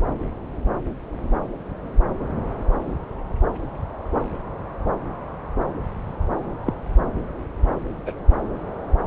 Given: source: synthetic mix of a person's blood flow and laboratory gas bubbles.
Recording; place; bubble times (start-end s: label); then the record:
Doppler ultrasound of blood flow; subclavian vein
6.66-6.73 s: bubbles
8.06-8.12 s: bubbles
From the record:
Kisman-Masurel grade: 112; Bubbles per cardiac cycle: 1 to 2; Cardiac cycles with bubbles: 1 to 10%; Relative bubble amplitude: moderate (0.250 to 0.450); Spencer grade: 1 (occasional bubble signal discernible with the cardiac motion signal, with majority of cardiac periods free of bubbles); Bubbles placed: anywhere in the cardiac cycle